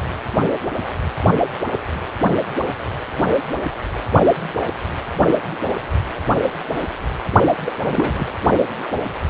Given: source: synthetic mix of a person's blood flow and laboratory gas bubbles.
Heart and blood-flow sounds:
Doppler ultrasound of blood flow; precordium
7.65-7.73 s: bubbles
7.84-8.12 s: bubbles
8.15-8.25 s: bubbles
From the record:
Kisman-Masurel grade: 222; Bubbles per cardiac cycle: several, 3 to 8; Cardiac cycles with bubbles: 10 to 50%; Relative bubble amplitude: moderate (0.250 to 0.450); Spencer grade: 2 (many but less than half of the cardiac periods contain bubble signals, singularly or in groups); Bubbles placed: only in the low amplitude regions of the cardiac cycle

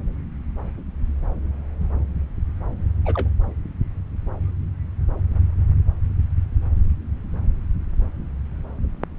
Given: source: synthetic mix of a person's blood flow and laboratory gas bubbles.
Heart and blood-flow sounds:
Doppler ultrasound of blood flow; subclavian vein
3.05-3.28 s: bubbles
From the record:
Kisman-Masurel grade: 211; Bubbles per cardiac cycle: several, 3 to 8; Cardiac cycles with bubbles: 1 to 10%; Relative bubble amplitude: barely perceptible (0.100 to 0.250); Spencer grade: 1 (occasional bubble signal discernible with the cardiac motion signal, with majority of cardiac periods free of bubbles); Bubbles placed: anywhere in the cardiac cycle

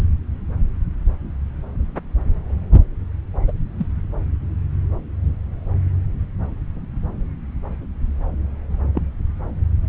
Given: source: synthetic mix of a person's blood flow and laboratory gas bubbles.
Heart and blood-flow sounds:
Doppler ultrasound of blood flow; subclavian vein
3.48-3.52 s: bubbles
3.78-3.87 s: bubbles
8.95-9.03 s: bubbles
From the record:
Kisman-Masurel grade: 122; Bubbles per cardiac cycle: 1 to 2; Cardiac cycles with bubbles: 10 to 50%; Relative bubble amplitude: moderate (0.250 to 0.450); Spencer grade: 2 (many but less than half of the cardiac periods contain bubble signals, singularly or in groups); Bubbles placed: anywhere in the cardiac cycle

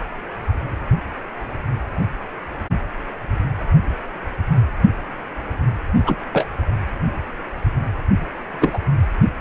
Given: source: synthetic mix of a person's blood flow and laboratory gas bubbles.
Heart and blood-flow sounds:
Doppler ultrasound of blood flow; precordium
6.05-6.16 s: bubbles
6.33-6.46 s: bubbles
8.61-8.79 s: bubbles
From the record:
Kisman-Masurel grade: 123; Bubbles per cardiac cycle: 1 to 2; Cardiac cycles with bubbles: 10 to 50%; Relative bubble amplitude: loud (0.450 to 0.775); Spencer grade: 2 (many but less than half of the cardiac periods contain bubble signals, singularly or in groups); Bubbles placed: anywhere in the cardiac cycle

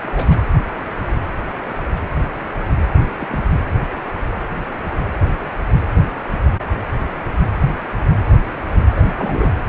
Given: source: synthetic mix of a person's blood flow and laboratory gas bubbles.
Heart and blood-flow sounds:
Doppler ultrasound of blood flow; precordium
0.03-0.41 s: bubbles
2.96-3.06 s: bubbles
3.17-3.44 s: bubbles
8.96-9.55 s: bubbles
From the record:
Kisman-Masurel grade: 221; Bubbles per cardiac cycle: several, 3 to 8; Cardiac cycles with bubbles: 10 to 50%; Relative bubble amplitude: barely perceptible (0.100 to 0.250); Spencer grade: 2 (many but less than half of the cardiac periods contain bubble signals, singularly or in groups); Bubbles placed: anywhere in the cardiac cycle

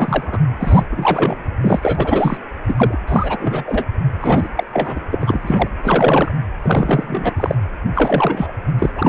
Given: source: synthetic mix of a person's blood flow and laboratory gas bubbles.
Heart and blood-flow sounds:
Doppler ultrasound of blood flow; precordium
0.00-0.39 s: bubbles
0.59-0.83 s: bubbles
0.91-1.36 s: bubbles
1.62-2.38 s: bubbles
2.67-2.97 s: bubbles
3.08-3.37 s: bubbles
3.40-3.85 s: bubbles
4.21-4.48 s: bubbles
4.56-4.63 s: bubbles
4.73-5.00 s: bubbles
5.12-5.69 s: bubbles
5.84-6.32 s: bubbles
6.62-7.55 s: bubbles
7.95-8.52 s: bubbles
8.79-8.89 s: bubbles
8.96-9.09 s: bubbles
From the record:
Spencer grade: 3 (all of the cardiac periods contain showers or single bubble signals, but not dominating or overriding the cardiac motion signals); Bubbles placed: anywhere in the cardiac cycle

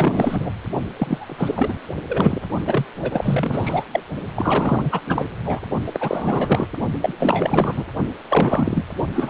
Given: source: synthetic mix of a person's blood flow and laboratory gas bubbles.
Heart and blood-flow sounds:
Doppler ultrasound of blood flow; precordium
0.00-0.52 s: bubbles
0.96-1.74 s: bubbles
2.08-2.42 s: bubbles
2.66-2.85 s: bubbles
3.02-3.85 s: bubbles
3.92-4.00 s: bubbles
4.35-5.01 s: bubbles
5.06-5.27 s: bubbles
5.44-5.61 s: bubbles
5.86-6.67 s: bubbles
7.01-7.13 s: bubbles
7.19-7.84 s: bubbles
8.29-8.86 s: bubbles
9.14-9.30 s: bubbles
From the record:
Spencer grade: 4 (maximum detectable bubble signal sounding continuously throughout systole and diastole of every cardiac period, and overriding the amplitude of the normal cardiac signals); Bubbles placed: only in the low amplitude regions of the cardiac cycle

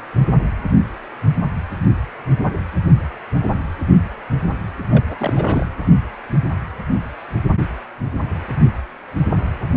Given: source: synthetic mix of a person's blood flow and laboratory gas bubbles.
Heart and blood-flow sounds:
Doppler ultrasound of blood flow; precordium
4.90-5.03 s: bubbles
5.09-5.66 s: bubbles
From the record:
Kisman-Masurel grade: 222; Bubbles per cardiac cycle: several, 3 to 8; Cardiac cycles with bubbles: 10 to 50%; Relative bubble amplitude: moderate (0.250 to 0.450); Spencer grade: 2 (many but less than half of the cardiac periods contain bubble signals, singularly or in groups); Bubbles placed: anywhere in the cardiac cycle

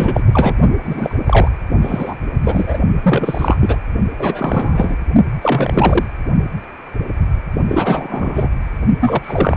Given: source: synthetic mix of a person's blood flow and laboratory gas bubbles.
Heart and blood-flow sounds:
Doppler ultrasound of blood flow; precordium
0.00-0.23 s: bubbles
0.33-0.55 s: bubbles
0.83-1.17 s: bubbles
1.26-1.49 s: bubbles
1.82-2.17 s: bubbles
2.44-2.79 s: bubbles
3.02-3.77 s: bubbles
4.19-4.97 s: bubbles
5.42-6.06 s: bubbles
7.68-8.50 s: bubbles
9.00-9.57 s: bubbles
From the record:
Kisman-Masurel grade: 333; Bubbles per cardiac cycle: rolling drumbeat, 9 or more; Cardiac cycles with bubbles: 50 to 99%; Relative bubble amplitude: loud (0.450 to 0.775); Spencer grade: 3 (all of the cardiac periods contain showers or single bubble signals, but not dominating or overriding the cardiac motion signals); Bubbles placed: only in the low amplitude regions of the cardiac cycle

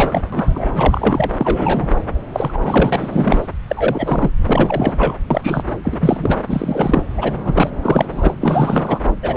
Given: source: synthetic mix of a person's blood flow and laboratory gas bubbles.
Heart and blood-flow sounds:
Doppler ultrasound of blood flow; subclavian vein
0.00-0.22 s: bubbles
0.32-0.69 s: bubbles
0.74-1.31 s: bubbles
1.38-1.89 s: bubbles
2.33-3.48 s: bubbles
3.68-4.30 s: bubbles
4.46-5.19 s: bubbles
5.30-5.63 s: bubbles
5.84-6.36 s: bubbles
6.49-7.03 s: bubbles
7.17-7.34 s: bubbles
7.45-7.70 s: bubbles
7.82-8.34 s: bubbles
8.40-8.99 s: bubbles
9.21-9.37 s: bubbles
From the record:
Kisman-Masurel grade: 343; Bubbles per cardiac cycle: rolling drumbeat, 9 or more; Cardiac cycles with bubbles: 100%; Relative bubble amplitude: loud (0.450 to 0.775); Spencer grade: 3 (all of the cardiac periods contain showers or single bubble signals, but not dominating or overriding the cardiac motion signals); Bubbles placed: anywhere in the cardiac cycle

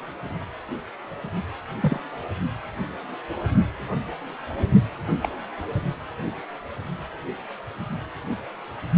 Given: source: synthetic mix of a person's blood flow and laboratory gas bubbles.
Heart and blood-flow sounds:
Doppler ultrasound of blood flow; precordium
1.80-2.00 s: bubbles
4.59-4.63 s: bubbles
5.22-5.29 s: bubbles
From the record:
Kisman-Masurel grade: 121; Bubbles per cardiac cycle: 1 to 2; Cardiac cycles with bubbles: 10 to 50%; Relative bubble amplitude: barely perceptible (0.100 to 0.250); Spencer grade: 2 (many but less than half of the cardiac periods contain bubble signals, singularly or in groups); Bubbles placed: only in the low amplitude regions of the cardiac cycle

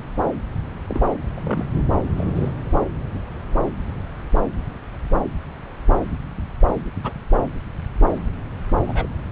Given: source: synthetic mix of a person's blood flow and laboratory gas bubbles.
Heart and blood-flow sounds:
Doppler ultrasound of blood flow; subclavian vein
0.89-1.01 s: bubbles
1.36-1.40 s: bubbles
1.43-1.68 s: bubbles
2.17-2.31 s: bubbles
2.35-2.49 s: bubbles
7.04-7.12 s: bubbles
8.87-9.07 s: bubbles
From the record:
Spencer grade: 2 (many but less than half of the cardiac periods contain bubble signals, singularly or in groups); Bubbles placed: anywhere in the cardiac cycle

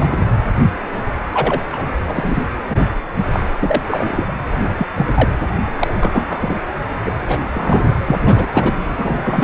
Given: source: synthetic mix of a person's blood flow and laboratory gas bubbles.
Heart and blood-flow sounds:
Doppler ultrasound of blood flow; precordium
0.00-0.24 s: bubbles
1.33-1.60 s: bubbles
1.73-1.92 s: bubbles
2.08-2.43 s: bubbles
2.70-2.77 s: bubbles
3.17-3.23 s: bubbles
3.32-3.40 s: bubbles
3.60-3.82 s: bubbles
3.88-4.33 s: bubbles
4.78-4.87 s: bubbles
4.95-5.06 s: bubbles
5.14-5.29 s: bubbles
5.79-5.88 s: bubbles
6.00-6.55 s: bubbles
7.05-7.12 s: bubbles
7.28-7.40 s: bubbles
7.54-7.98 s: bubbles
8.05-8.17 s: bubbles
8.25-8.46 s: bubbles
8.51-8.74 s: bubbles
8.98-9.44 s: bubbles
From the record:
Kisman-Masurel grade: 243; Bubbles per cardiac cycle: several, 3 to 8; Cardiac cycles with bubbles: 100%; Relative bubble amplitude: loud (0.450 to 0.775); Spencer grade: 3 (all of the cardiac periods contain showers or single bubble signals, but not dominating or overriding the cardiac motion signals); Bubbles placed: anywhere in the cardiac cycle

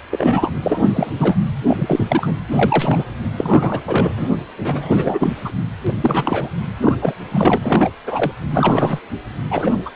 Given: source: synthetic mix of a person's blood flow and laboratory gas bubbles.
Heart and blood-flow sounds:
Doppler ultrasound of blood flow; precordium
0.10-0.51 s: bubbles
0.62-1.35 s: bubbles
1.67-2.35 s: bubbles
2.50-3.05 s: bubbles
3.38-3.82 s: bubbles
3.86-4.28 s: bubbles
4.57-5.33 s: bubbles
5.44-5.52 s: bubbles
5.87-5.93 s: bubbles
6.02-6.49 s: bubbles
6.81-6.96 s: bubbles
7.01-7.15 s: bubbles
7.31-7.58 s: bubbles
7.62-7.91 s: bubbles
8.07-8.32 s: bubbles
8.51-9.00 s: bubbles
9.50-9.83 s: bubbles
9.86-9.90 s: bubbles
From the record:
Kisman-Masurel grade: 343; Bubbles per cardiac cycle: rolling drumbeat, 9 or more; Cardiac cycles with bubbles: 100%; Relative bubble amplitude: loud (0.450 to 0.775); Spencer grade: 3 (all of the cardiac periods contain showers or single bubble signals, but not dominating or overriding the cardiac motion signals); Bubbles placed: anywhere in the cardiac cycle

